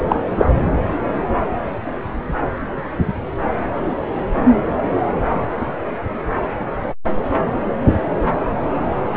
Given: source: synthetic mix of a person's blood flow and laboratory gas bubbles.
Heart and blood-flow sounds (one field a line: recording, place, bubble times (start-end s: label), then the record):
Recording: Doppler ultrasound of blood flow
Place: subclavian vein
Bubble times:
0.09-0.21 s: bubbles
0.38-0.46 s: bubbles
From the record:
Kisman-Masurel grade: 113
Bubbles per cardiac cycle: 1 to 2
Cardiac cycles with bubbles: 1 to 10%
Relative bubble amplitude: loud (0.450 to 0.775)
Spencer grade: 1 (occasional bubble signal discernible with the cardiac motion signal, with majority of cardiac periods free of bubbles)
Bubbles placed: anywhere in the cardiac cycle